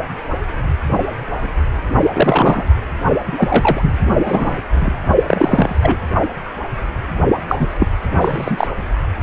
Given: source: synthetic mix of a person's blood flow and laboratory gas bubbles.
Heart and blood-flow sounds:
Doppler ultrasound of blood flow; precordium
2.12-2.65 s: bubbles
3.26-3.92 s: bubbles
4.25-4.57 s: bubbles
4.71-4.98 s: bubbles
5.26-5.99 s: bubbles
7.48-7.66 s: bubbles
7.79-7.88 s: bubbles
8.21-8.67 s: bubbles
From the record:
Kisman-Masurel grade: 223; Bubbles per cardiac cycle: several, 3 to 8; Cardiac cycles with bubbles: 10 to 50%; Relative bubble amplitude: loud (0.450 to 0.775); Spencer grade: 2 (many but less than half of the cardiac periods contain bubble signals, singularly or in groups); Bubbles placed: only in the low amplitude regions of the cardiac cycle

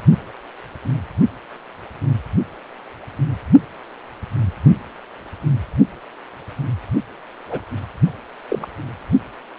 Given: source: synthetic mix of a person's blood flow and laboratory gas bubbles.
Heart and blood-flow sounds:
Doppler ultrasound of blood flow; precordium
7.49-7.60 s: bubbles
8.50-8.67 s: bubbles
From the record:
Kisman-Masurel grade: 122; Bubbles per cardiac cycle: 1 to 2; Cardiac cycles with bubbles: 10 to 50%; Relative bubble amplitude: moderate (0.250 to 0.450); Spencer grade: 2 (many but less than half of the cardiac periods contain bubble signals, singularly or in groups); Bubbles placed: only in the low amplitude regions of the cardiac cycle

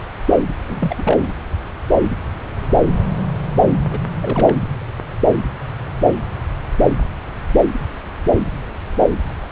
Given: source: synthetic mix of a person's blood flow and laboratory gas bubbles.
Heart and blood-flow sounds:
Doppler ultrasound of blood flow; subclavian vein
0.68-0.95 s: bubbles
0.98-1.33 s: bubbles
3.91-4.00 s: bubbles
4.21-4.54 s: bubbles
From the record:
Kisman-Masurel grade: 222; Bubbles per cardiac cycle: several, 3 to 8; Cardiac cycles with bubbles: 10 to 50%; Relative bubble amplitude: moderate (0.250 to 0.450); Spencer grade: 2 (many but less than half of the cardiac periods contain bubble signals, singularly or in groups); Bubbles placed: anywhere in the cardiac cycle

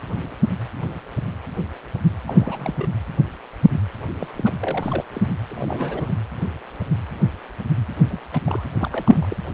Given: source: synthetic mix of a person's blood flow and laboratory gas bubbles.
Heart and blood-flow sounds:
Doppler ultrasound of blood flow; precordium
2.27-2.89 s: bubbles
4.20-4.28 s: bubbles
4.38-4.53 s: bubbles
4.61-5.04 s: bubbles
5.14-5.21 s: bubbles
5.48-6.13 s: bubbles
8.08-8.20 s: bubbles
8.32-8.39 s: bubbles
8.45-8.62 s: bubbles
8.78-9.37 s: bubbles
From the record:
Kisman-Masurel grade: 221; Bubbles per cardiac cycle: several, 3 to 8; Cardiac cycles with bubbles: 10 to 50%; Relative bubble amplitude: barely perceptible (0.100 to 0.250); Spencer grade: 2 (many but less than half of the cardiac periods contain bubble signals, singularly or in groups); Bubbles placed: anywhere in the cardiac cycle

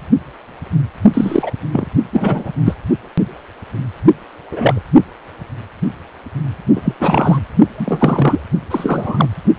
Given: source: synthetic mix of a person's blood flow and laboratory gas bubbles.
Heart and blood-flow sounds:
Doppler ultrasound of blood flow; precordium
1.14-1.51 s: bubbles
1.73-1.86 s: bubbles
2.12-2.52 s: bubbles
2.65-2.77 s: bubbles
4.51-4.80 s: bubbles
6.75-6.82 s: bubbles
6.84-6.95 s: bubbles
7.00-7.39 s: bubbles
7.77-8.41 s: bubbles
8.71-9.28 s: bubbles
From the record:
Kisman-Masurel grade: 233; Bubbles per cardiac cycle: several, 3 to 8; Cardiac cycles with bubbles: 50 to 99%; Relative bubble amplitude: loud (0.450 to 0.775); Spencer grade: 3 (all of the cardiac periods contain showers or single bubble signals, but not dominating or overriding the cardiac motion signals); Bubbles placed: only in the low amplitude regions of the cardiac cycle

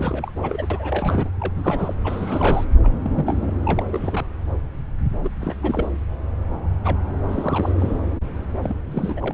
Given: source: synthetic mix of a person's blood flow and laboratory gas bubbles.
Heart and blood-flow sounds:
Doppler ultrasound of blood flow; subclavian vein
0.00-0.31 s: bubbles
0.42-0.67 s: bubbles
0.70-1.29 s: bubbles
1.40-1.94 s: bubbles
2.04-2.65 s: bubbles
2.82-3.52 s: bubbles
3.65-3.84 s: bubbles
3.91-4.25 s: bubbles
5.22-5.29 s: bubbles
5.40-5.54 s: bubbles
5.62-5.87 s: bubbles
6.84-6.99 s: bubbles
7.28-7.72 s: bubbles
7.79-7.96 s: bubbles
8.62-9.34 s: bubbles
From the record:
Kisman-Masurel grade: 332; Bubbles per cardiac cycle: rolling drumbeat, 9 or more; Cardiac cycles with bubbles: 50 to 99%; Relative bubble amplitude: moderate (0.250 to 0.450); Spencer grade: 3 (all of the cardiac periods contain showers or single bubble signals, but not dominating or overriding the cardiac motion signals); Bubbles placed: anywhere in the cardiac cycle

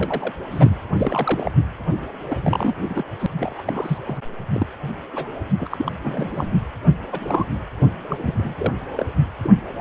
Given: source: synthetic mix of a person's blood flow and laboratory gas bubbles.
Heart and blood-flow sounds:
Doppler ultrasound of blood flow; precordium
0.00-0.33 s: bubbles
0.50-0.73 s: bubbles
0.96-1.51 s: bubbles
2.29-2.38 s: bubbles
2.40-2.75 s: bubbles
2.89-3.04 s: bubbles
3.19-3.27 s: bubbles
3.40-3.62 s: bubbles
3.67-3.98 s: bubbles
4.06-4.17 s: bubbles
4.53-4.66 s: bubbles
5.13-5.28 s: bubbles
5.60-5.67 s: bubbles
5.70-6.52 s: bubbles
7.12-7.46 s: bubbles
8.08-8.55 s: bubbles
8.58-8.73 s: bubbles
8.95-9.05 s: bubbles
9.43-9.50 s: bubbles
From the record:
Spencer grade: 3 (all of the cardiac periods contain showers or single bubble signals, but not dominating or overriding the cardiac motion signals); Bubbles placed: anywhere in the cardiac cycle

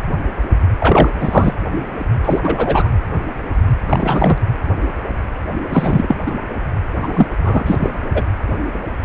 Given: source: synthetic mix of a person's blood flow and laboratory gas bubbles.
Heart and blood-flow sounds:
Doppler ultrasound of blood flow; precordium
0.79-1.10 s: bubbles
1.20-1.54 s: bubbles
2.24-2.40 s: bubbles
2.43-2.88 s: bubbles
3.88-4.38 s: bubbles
5.70-6.16 s: bubbles
6.26-6.32 s: bubbles
7.02-7.27 s: bubbles
7.41-7.63 s: bubbles
7.66-7.90 s: bubbles
8.14-8.22 s: bubbles
From the record:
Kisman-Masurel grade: 223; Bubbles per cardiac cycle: several, 3 to 8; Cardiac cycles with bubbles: 10 to 50%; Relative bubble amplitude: loud (0.450 to 0.775); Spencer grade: 2 (many but less than half of the cardiac periods contain bubble signals, singularly or in groups); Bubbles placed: anywhere in the cardiac cycle

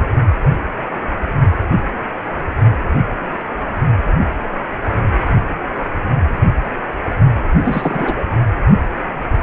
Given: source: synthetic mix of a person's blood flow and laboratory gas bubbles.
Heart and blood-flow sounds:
Doppler ultrasound of blood flow; precordium
7.64-8.27 s: bubbles
From the record:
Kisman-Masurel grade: 212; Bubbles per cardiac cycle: several, 3 to 8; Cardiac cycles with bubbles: 1 to 10%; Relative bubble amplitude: moderate (0.250 to 0.450); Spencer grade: 1 (occasional bubble signal discernible with the cardiac motion signal, with majority of cardiac periods free of bubbles); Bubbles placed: anywhere in the cardiac cycle

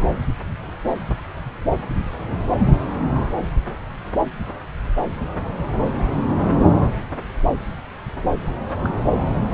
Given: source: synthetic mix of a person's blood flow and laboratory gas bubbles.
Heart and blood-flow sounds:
Doppler ultrasound of blood flow; subclavian vein
8.48-8.51 s: bubbles
8.84-8.88 s: bubbles
From the record:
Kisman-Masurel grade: 111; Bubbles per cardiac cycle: 1 to 2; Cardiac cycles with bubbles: 1 to 10%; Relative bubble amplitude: barely perceptible (0.100 to 0.250); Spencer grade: 1 (occasional bubble signal discernible with the cardiac motion signal, with majority of cardiac periods free of bubbles); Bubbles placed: anywhere in the cardiac cycle

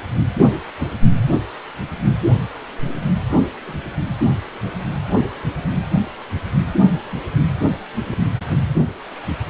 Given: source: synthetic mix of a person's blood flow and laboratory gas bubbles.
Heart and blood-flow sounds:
Doppler ultrasound of blood flow; precordium
0.78-0.91 s: bubbles
2.29-2.39 s: bubbles
3.67-3.73 s: bubbles
8.05-8.18 s: bubbles
From the record:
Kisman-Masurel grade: 121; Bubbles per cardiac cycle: 1 to 2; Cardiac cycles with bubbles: 10 to 50%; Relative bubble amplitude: barely perceptible (0.100 to 0.250); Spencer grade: 2 (many but less than half of the cardiac periods contain bubble signals, singularly or in groups); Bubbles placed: anywhere in the cardiac cycle

